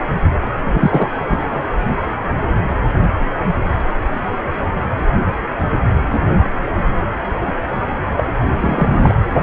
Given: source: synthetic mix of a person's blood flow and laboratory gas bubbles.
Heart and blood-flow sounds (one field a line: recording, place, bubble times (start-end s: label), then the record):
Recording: Doppler ultrasound of blood flow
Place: precordium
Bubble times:
0.64-1.10 s: bubbles
1.28-1.61 s: bubbles
8.16-8.24 s: bubbles
8.62-9.12 s: bubbles
From the record:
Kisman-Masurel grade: 223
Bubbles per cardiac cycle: several, 3 to 8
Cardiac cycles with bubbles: 10 to 50%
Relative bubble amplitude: loud (0.450 to 0.775)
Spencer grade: 2 (many but less than half of the cardiac periods contain bubble signals, singularly or in groups)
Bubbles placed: anywhere in the cardiac cycle